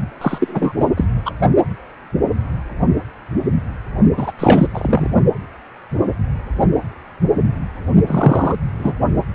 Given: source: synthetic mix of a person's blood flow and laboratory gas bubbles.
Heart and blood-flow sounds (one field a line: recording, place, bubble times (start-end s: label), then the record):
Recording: Doppler ultrasound of blood flow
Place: precordium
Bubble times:
0.21-0.84 s: bubbles
0.96-1.05 s: bubbles
1.26-1.31 s: bubbles
4.17-4.32 s: bubbles
4.38-4.67 s: bubbles
4.74-5.14 s: bubbles
8.07-8.55 s: bubbles
8.79-8.93 s: bubbles
From the record:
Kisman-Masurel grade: 223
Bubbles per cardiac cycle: several, 3 to 8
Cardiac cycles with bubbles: 10 to 50%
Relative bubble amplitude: loud (0.450 to 0.775)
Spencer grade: 2 (many but less than half of the cardiac periods contain bubble signals, singularly or in groups)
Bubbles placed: only in the low amplitude regions of the cardiac cycle